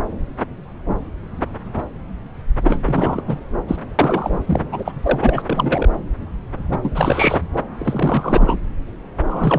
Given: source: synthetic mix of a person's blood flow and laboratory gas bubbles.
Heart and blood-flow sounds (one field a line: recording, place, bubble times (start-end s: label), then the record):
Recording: Doppler ultrasound of blood flow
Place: subclavian vein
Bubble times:
2.64-2.80 s: bubbles
2.84-3.22 s: bubbles
3.27-3.38 s: bubbles
3.67-3.76 s: bubbles
3.98-4.38 s: bubbles
4.47-4.61 s: bubbles
4.72-4.92 s: bubbles
5.03-5.43 s: bubbles
5.46-5.89 s: bubbles
6.72-7.41 s: bubbles
7.78-8.58 s: bubbles
9.26-9.59 s: bubbles
From the record:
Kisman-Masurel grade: 332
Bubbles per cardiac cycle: rolling drumbeat, 9 or more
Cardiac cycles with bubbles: 50 to 99%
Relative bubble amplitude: moderate (0.250 to 0.450)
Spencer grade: 3 (all of the cardiac periods contain showers or single bubble signals, but not dominating or overriding the cardiac motion signals)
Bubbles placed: anywhere in the cardiac cycle